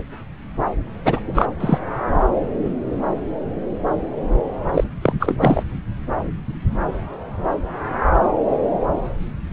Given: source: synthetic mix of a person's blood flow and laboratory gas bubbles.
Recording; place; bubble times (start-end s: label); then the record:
Doppler ultrasound of blood flow; subclavian vein
1.05-1.20 s: bubbles
1.26-1.46 s: bubbles
1.60-1.78 s: bubbles
4.74-4.84 s: bubbles
5.01-5.13 s: bubbles
5.19-5.63 s: bubbles
From the record:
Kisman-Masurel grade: 223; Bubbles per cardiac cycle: several, 3 to 8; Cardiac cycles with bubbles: 10 to 50%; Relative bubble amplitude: loud (0.450 to 0.775); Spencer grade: 2 (many but less than half of the cardiac periods contain bubble signals, singularly or in groups); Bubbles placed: anywhere in the cardiac cycle